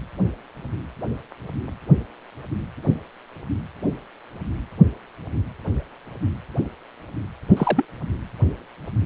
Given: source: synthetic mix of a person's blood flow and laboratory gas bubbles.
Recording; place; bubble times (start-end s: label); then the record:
Doppler ultrasound of blood flow; precordium
7.56-7.85 s: bubbles
From the record:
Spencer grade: 1 (occasional bubble signal discernible with the cardiac motion signal, with majority of cardiac periods free of bubbles); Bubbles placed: anywhere in the cardiac cycle